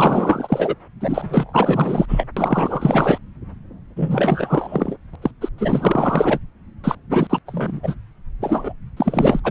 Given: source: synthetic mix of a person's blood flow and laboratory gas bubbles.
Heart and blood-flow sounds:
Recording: Doppler ultrasound of blood flow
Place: subclavian vein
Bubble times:
0.00-0.75 s: bubbles
1.00-2.06 s: bubbles
2.08-2.27 s: bubbles
2.37-3.18 s: bubbles
3.96-4.96 s: bubbles
5.13-5.16 s: bubbles
5.21-5.31 s: bubbles
5.41-5.49 s: bubbles
5.58-6.40 s: bubbles
6.83-6.95 s: bubbles
7.08-7.27 s: bubbles
7.29-7.38 s: bubbles
7.46-7.96 s: bubbles
8.40-8.73 s: bubbles
8.96-9.40 s: bubbles
9.44-9.51 s: bubbles
From the record:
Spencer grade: 4 (maximum detectable bubble signal sounding continuously throughout systole and diastole of every cardiac period, and overriding the amplitude of the normal cardiac signals)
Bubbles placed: anywhere in the cardiac cycle

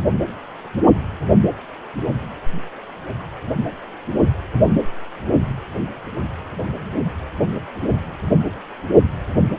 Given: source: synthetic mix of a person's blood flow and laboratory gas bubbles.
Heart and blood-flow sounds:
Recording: Doppler ultrasound of blood flow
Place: precordium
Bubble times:
no bubbles
From the record:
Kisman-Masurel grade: 000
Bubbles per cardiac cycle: 0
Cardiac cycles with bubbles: 0%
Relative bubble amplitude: no bubbles discernible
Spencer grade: 0 (complete lack of bubble signals)

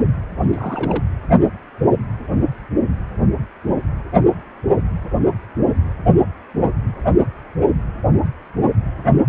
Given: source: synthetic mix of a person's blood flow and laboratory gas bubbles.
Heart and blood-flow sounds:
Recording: Doppler ultrasound of blood flow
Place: precordium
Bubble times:
0.36-1.05 s: bubbles
From the record:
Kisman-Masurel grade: 211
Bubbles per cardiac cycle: several, 3 to 8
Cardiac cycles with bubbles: 1 to 10%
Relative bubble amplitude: barely perceptible (0.100 to 0.250)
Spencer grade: 1 (occasional bubble signal discernible with the cardiac motion signal, with majority of cardiac periods free of bubbles)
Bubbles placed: anywhere in the cardiac cycle

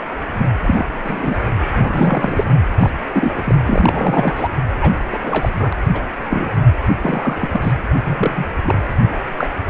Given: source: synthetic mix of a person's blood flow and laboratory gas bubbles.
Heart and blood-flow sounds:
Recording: Doppler ultrasound of blood flow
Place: precordium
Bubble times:
0.32-0.50 s: bubbles
0.64-0.86 s: bubbles
1.03-1.37 s: bubbles
1.72-2.44 s: bubbles
2.79-2.90 s: bubbles
3.12-3.56 s: bubbles
3.67-4.48 s: bubbles
4.79-4.96 s: bubbles
5.11-5.70 s: bubbles
5.72-5.77 s: bubbles
5.93-6.03 s: bubbles
6.29-6.49 s: bubbles
7.03-7.48 s: bubbles
7.53-7.72 s: bubbles
8.03-8.46 s: bubbles
8.63-8.78 s: bubbles
9.38-9.47 s: bubbles
9.65-9.70 s: bubbles
From the record:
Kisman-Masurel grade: 242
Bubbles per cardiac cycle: several, 3 to 8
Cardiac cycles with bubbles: 100%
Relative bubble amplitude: moderate (0.250 to 0.450)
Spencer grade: 3 (all of the cardiac periods contain showers or single bubble signals, but not dominating or overriding the cardiac motion signals)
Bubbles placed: anywhere in the cardiac cycle

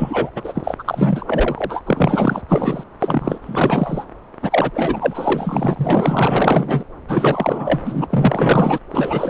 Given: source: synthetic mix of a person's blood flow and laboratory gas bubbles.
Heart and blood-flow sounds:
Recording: Doppler ultrasound of blood flow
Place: subclavian vein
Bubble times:
0.00-0.30 s: bubbles
0.36-1.81 s: bubbles
1.86-2.42 s: bubbles
2.48-2.83 s: bubbles
2.99-3.38 s: bubbles
3.41-4.04 s: bubbles
4.42-4.71 s: bubbles
4.75-6.83 s: bubbles
7.08-7.80 s: bubbles
7.85-8.07 s: bubbles
8.10-8.79 s: bubbles
8.91-9.30 s: bubbles
From the record:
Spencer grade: 4 (maximum detectable bubble signal sounding continuously throughout systole and diastole of every cardiac period, and overriding the amplitude of the normal cardiac signals)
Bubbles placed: anywhere in the cardiac cycle

